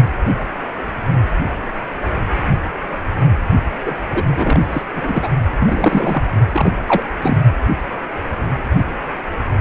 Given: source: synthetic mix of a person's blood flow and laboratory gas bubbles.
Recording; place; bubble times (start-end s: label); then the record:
Doppler ultrasound of blood flow; precordium
3.86-3.96 s: bubbles
4.13-4.23 s: bubbles
4.26-4.62 s: bubbles
4.71-4.83 s: bubbles
4.95-5.29 s: bubbles
5.59-6.23 s: bubbles
6.52-6.71 s: bubbles
6.86-7.02 s: bubbles
7.22-7.38 s: bubbles
From the record:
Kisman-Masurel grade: 223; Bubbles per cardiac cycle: several, 3 to 8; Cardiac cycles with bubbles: 10 to 50%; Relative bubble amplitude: loud (0.450 to 0.775); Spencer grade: 2 (many but less than half of the cardiac periods contain bubble signals, singularly or in groups); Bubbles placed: only in the low amplitude regions of the cardiac cycle